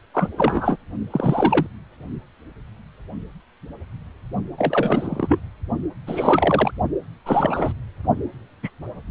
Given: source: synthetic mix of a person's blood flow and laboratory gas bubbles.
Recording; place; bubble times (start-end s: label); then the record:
Doppler ultrasound of blood flow; precordium
0.14-0.29 s: bubbles
0.36-0.77 s: bubbles
1.10-1.67 s: bubbles
4.58-5.40 s: bubbles
6.07-6.72 s: bubbles
7.26-7.73 s: bubbles
8.62-8.70 s: bubbles
From the record:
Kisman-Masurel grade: 233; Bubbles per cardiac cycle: several, 3 to 8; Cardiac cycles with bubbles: 50 to 99%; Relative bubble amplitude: loud (0.450 to 0.775); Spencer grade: 3 (all of the cardiac periods contain showers or single bubble signals, but not dominating or overriding the cardiac motion signals); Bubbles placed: only in the low amplitude regions of the cardiac cycle